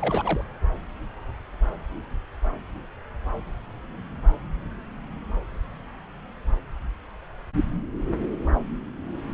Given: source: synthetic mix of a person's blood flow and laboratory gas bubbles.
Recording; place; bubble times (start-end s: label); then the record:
Doppler ultrasound of blood flow; subclavian vein
0.00-0.44 s: bubbles
From the record:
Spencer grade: 1 (occasional bubble signal discernible with the cardiac motion signal, with majority of cardiac periods free of bubbles); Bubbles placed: anywhere in the cardiac cycle